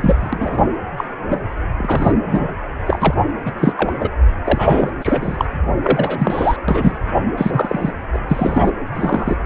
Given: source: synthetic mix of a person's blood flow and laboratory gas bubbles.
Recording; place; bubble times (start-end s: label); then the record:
Doppler ultrasound of blood flow; precordium
0.00-0.67 s: bubbles
0.96-1.05 s: bubbles
1.28-1.42 s: bubbles
1.77-2.12 s: bubbles
2.27-2.50 s: bubbles
2.86-3.15 s: bubbles
3.45-3.54 s: bubbles
3.59-3.74 s: bubbles
3.76-3.92 s: bubbles
4.00-4.09 s: bubbles
4.44-4.91 s: bubbles
5.01-5.45 s: bubbles
5.83-6.56 s: bubbles
6.68-6.98 s: bubbles
7.37-7.93 s: bubbles
8.13-8.19 s: bubbles
8.29-8.71 s: bubbles
8.94-9.37 s: bubbles
From the record:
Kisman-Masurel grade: 243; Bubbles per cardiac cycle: several, 3 to 8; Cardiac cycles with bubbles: 100%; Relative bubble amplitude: loud (0.450 to 0.775); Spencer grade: 3 (all of the cardiac periods contain showers or single bubble signals, but not dominating or overriding the cardiac motion signals); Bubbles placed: anywhere in the cardiac cycle